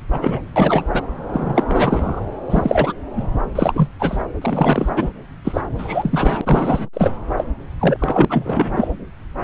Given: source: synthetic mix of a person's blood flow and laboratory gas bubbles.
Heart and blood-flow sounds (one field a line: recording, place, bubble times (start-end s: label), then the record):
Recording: Doppler ultrasound of blood flow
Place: subclavian vein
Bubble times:
0.12-0.41 s: bubbles
0.56-0.84 s: bubbles
0.93-1.02 s: bubbles
1.32-1.64 s: bubbles
1.68-2.21 s: bubbles
2.50-2.93 s: bubbles
3.15-3.27 s: bubbles
3.55-3.88 s: bubbles
3.99-4.18 s: bubbles
4.41-4.89 s: bubbles
4.96-5.11 s: bubbles
5.45-5.61 s: bubbles
5.78-6.41 s: bubbles
6.45-6.89 s: bubbles
6.93-7.11 s: bubbles
7.38-7.44 s: bubbles
7.79-8.25 s: bubbles
8.29-8.88 s: bubbles
9.40-9.44 s: bubbles
From the record:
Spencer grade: 3 (all of the cardiac periods contain showers or single bubble signals, but not dominating or overriding the cardiac motion signals)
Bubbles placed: anywhere in the cardiac cycle